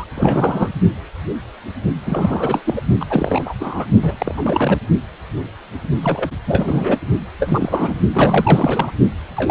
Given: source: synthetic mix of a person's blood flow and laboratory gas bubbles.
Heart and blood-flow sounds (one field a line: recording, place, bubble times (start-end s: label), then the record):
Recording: Doppler ultrasound of blood flow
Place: precordium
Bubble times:
0.00-0.04 s: bubbles
0.15-0.68 s: bubbles
2.06-2.62 s: bubbles
2.65-2.81 s: bubbles
3.00-3.06 s: bubbles
3.10-3.54 s: bubbles
3.60-3.86 s: bubbles
4.02-4.35 s: bubbles
4.37-4.79 s: bubbles
6.03-6.29 s: bubbles
6.47-6.98 s: bubbles
7.39-7.96 s: bubbles
8.12-8.92 s: bubbles
9.37-9.51 s: bubbles
From the record:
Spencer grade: 3 (all of the cardiac periods contain showers or single bubble signals, but not dominating or overriding the cardiac motion signals)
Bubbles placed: only in the low amplitude regions of the cardiac cycle